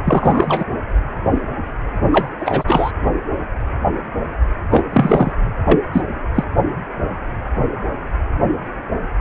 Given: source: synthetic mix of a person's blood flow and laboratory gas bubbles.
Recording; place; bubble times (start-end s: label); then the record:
Doppler ultrasound of blood flow; precordium
0.05-0.64 s: bubbles
2.12-2.30 s: bubbles
2.40-2.65 s: bubbles
2.67-2.92 s: bubbles
4.71-4.84 s: bubbles
4.92-5.31 s: bubbles
5.65-5.79 s: bubbles
5.92-6.01 s: bubbles
6.34-6.44 s: bubbles
From the record:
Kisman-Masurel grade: 223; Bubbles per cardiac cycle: several, 3 to 8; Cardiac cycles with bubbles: 10 to 50%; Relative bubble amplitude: loud (0.450 to 0.775); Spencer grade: 2 (many but less than half of the cardiac periods contain bubble signals, singularly or in groups); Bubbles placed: only in the low amplitude regions of the cardiac cycle